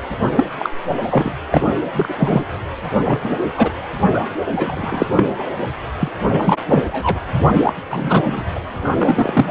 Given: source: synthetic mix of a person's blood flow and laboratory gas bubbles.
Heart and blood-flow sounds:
Doppler ultrasound of blood flow; precordium
0.36-0.45 s: bubbles
0.58-0.70 s: bubbles
1.02-1.31 s: bubbles
1.51-1.74 s: bubbles
1.92-2.15 s: bubbles
2.19-2.44 s: bubbles
2.83-2.90 s: bubbles
3.04-3.19 s: bubbles
3.23-3.46 s: bubbles
3.57-3.72 s: bubbles
4.13-4.20 s: bubbles
4.48-5.23 s: bubbles
5.38-5.49 s: bubbles
5.99-6.09 s: bubbles
6.29-6.56 s: bubbles
6.66-6.82 s: bubbles
6.88-7.20 s: bubbles
7.48-7.73 s: bubbles
7.89-8.44 s: bubbles
8.55-8.60 s: bubbles
8.74-9.49 s: bubbles
From the record:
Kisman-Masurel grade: 233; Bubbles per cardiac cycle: several, 3 to 8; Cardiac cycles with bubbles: 50 to 99%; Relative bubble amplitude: loud (0.450 to 0.775); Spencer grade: 3 (all of the cardiac periods contain showers or single bubble signals, but not dominating or overriding the cardiac motion signals); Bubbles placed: anywhere in the cardiac cycle

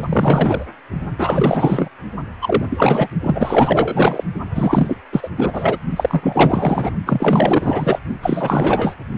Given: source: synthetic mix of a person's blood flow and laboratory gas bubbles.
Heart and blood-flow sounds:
Doppler ultrasound of blood flow; precordium
0.00-0.66 s: bubbles
1.18-1.89 s: bubbles
2.42-2.65 s: bubbles
2.70-3.08 s: bubbles
3.22-4.24 s: bubbles
4.50-4.97 s: bubbles
5.12-5.29 s: bubbles
5.37-5.78 s: bubbles
5.91-6.96 s: bubbles
7.06-8.00 s: bubbles
8.22-8.94 s: bubbles
From the record:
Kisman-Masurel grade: 444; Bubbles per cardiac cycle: continuous sound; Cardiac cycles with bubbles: 100%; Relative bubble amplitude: maximal (0.775 to 0.999); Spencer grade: 4 (maximum detectable bubble signal sounding continuously throughout systole and diastole of every cardiac period, and overriding the amplitude of the normal cardiac signals); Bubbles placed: only in the low amplitude regions of the cardiac cycle

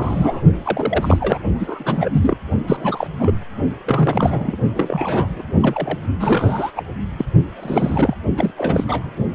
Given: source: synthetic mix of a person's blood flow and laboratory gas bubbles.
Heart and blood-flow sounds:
Doppler ultrasound of blood flow; precordium
0.00-0.41 s: bubbles
0.64-1.39 s: bubbles
1.59-2.10 s: bubbles
2.13-2.38 s: bubbles
2.67-3.07 s: bubbles
3.19-3.34 s: bubbles
3.85-4.56 s: bubbles
4.75-5.42 s: bubbles
5.61-5.99 s: bubbles
6.20-6.71 s: bubbles
6.76-6.83 s: bubbles
7.17-7.25 s: bubbles
7.55-8.16 s: bubbles
8.37-8.51 s: bubbles
8.57-8.85 s: bubbles
8.87-9.10 s: bubbles
From the record:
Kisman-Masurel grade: 342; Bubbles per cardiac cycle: rolling drumbeat, 9 or more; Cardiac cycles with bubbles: 100%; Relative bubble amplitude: moderate (0.250 to 0.450); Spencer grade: 3 (all of the cardiac periods contain showers or single bubble signals, but not dominating or overriding the cardiac motion signals); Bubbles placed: only in the low amplitude regions of the cardiac cycle

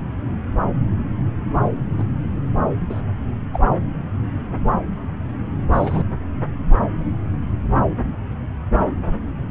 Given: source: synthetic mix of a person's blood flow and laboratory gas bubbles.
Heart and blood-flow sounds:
Doppler ultrasound of blood flow; subclavian vein
1.97-2.04 s: bubbles
2.89-3.01 s: bubbles
3.53-3.59 s: bubbles
5.73-6.04 s: bubbles
From the record:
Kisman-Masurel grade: 122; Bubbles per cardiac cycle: 1 to 2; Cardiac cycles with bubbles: 10 to 50%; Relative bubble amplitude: moderate (0.250 to 0.450); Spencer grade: 2 (many but less than half of the cardiac periods contain bubble signals, singularly or in groups); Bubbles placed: anywhere in the cardiac cycle

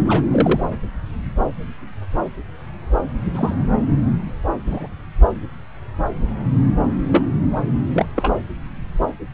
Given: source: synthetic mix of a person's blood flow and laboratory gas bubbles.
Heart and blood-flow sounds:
Doppler ultrasound of blood flow; subclavian vein
0.00-0.21 s: bubbles
0.31-0.61 s: bubbles
3.35-3.72 s: bubbles
4.66-4.88 s: bubbles
7.12-7.24 s: bubbles
7.94-8.05 s: bubbles
8.15-8.33 s: bubbles
From the record:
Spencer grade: 2 (many but less than half of the cardiac periods contain bubble signals, singularly or in groups); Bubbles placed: anywhere in the cardiac cycle

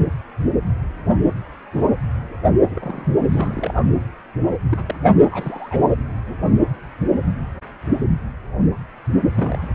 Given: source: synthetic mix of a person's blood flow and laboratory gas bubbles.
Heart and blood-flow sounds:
Doppler ultrasound of blood flow; precordium
2.70-3.08 s: bubbles
3.32-3.88 s: bubbles
4.71-4.84 s: bubbles
4.88-4.95 s: bubbles
5.04-5.12 s: bubbles
5.31-5.88 s: bubbles
9.35-9.75 s: bubbles
From the record:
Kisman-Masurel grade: 221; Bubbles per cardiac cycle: several, 3 to 8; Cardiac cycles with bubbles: 10 to 50%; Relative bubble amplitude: barely perceptible (0.100 to 0.250); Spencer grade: 2 (many but less than half of the cardiac periods contain bubble signals, singularly or in groups); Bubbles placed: anywhere in the cardiac cycle

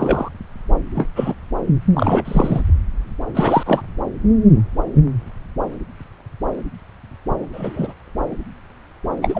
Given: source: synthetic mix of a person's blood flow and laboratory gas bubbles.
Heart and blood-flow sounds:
Doppler ultrasound of blood flow; subclavian vein
0.00-0.29 s: bubbles
0.95-1.09 s: bubbles
1.16-1.35 s: bubbles
1.93-2.62 s: bubbles
3.34-3.63 s: bubbles
3.66-3.81 s: bubbles
7.53-7.94 s: bubbles
9.21-9.40 s: bubbles
From the record:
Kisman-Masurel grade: 223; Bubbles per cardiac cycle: several, 3 to 8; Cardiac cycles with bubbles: 10 to 50%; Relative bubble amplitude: loud (0.450 to 0.775); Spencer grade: 2 (many but less than half of the cardiac periods contain bubble signals, singularly or in groups); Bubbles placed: anywhere in the cardiac cycle

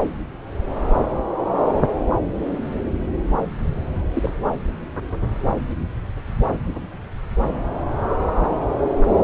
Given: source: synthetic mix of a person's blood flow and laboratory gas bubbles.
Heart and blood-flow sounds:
Doppler ultrasound of blood flow; subclavian vein
4.13-4.31 s: bubbles
From the record:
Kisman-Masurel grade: 122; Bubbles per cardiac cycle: 1 to 2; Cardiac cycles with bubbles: 10 to 50%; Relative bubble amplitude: moderate (0.250 to 0.450); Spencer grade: 2 (many but less than half of the cardiac periods contain bubble signals, singularly or in groups); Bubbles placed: anywhere in the cardiac cycle

